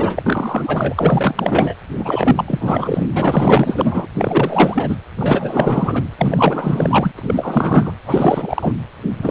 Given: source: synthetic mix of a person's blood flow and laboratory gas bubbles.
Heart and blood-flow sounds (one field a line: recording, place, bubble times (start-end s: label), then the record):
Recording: Doppler ultrasound of blood flow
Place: precordium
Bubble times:
0.00-1.74 s: bubbles
1.98-2.45 s: bubbles
2.47-3.06 s: bubbles
3.15-4.06 s: bubbles
4.18-4.96 s: bubbles
5.18-6.04 s: bubbles
6.18-7.12 s: bubbles
7.18-7.93 s: bubbles
8.06-8.73 s: bubbles
9.22-9.31 s: bubbles
From the record:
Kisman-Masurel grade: 444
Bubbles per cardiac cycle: continuous sound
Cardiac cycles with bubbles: 100%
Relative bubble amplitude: maximal (0.775 to 0.999)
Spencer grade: 4 (maximum detectable bubble signal sounding continuously throughout systole and diastole of every cardiac period, and overriding the amplitude of the normal cardiac signals)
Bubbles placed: anywhere in the cardiac cycle